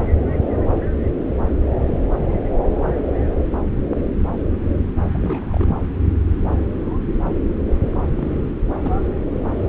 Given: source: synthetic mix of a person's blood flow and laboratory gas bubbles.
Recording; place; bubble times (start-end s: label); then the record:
Doppler ultrasound of blood flow; subclavian vein
5.13-5.18 s: bubbles
5.21-5.82 s: bubbles
8.17-8.32 s: bubbles
8.82-9.00 s: bubbles
From the record:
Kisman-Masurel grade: 221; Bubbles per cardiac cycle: several, 3 to 8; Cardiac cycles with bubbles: 10 to 50%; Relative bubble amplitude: barely perceptible (0.100 to 0.250); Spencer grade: 2 (many but less than half of the cardiac periods contain bubble signals, singularly or in groups); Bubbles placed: anywhere in the cardiac cycle